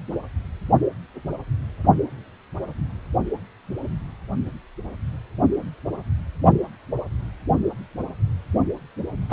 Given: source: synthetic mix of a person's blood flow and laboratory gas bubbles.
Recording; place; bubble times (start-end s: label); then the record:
Doppler ultrasound of blood flow; precordium
9.29-9.33 s: bubbles
From the record:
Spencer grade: 1 (occasional bubble signal discernible with the cardiac motion signal, with majority of cardiac periods free of bubbles); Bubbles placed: only in the low amplitude regions of the cardiac cycle